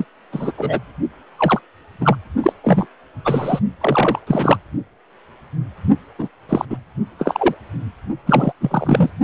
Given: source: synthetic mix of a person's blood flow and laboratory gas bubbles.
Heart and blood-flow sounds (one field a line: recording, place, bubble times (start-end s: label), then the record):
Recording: Doppler ultrasound of blood flow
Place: precordium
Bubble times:
0.00-0.05 s: bubbles
0.32-0.52 s: bubbles
0.57-0.79 s: bubbles
1.37-1.61 s: bubbles
2.00-2.17 s: bubbles
2.42-2.53 s: bubbles
2.63-2.87 s: bubbles
3.25-3.59 s: bubbles
3.80-4.19 s: bubbles
4.27-4.58 s: bubbles
6.18-6.28 s: bubbles
6.49-6.65 s: bubbles
6.69-6.78 s: bubbles
7.18-7.54 s: bubbles
8.26-8.53 s: bubbles
8.61-9.10 s: bubbles
From the record:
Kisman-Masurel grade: 233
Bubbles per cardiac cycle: several, 3 to 8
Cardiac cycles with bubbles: 50 to 99%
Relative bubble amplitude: loud (0.450 to 0.775)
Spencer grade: 3 (all of the cardiac periods contain showers or single bubble signals, but not dominating or overriding the cardiac motion signals)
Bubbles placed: only in the low amplitude regions of the cardiac cycle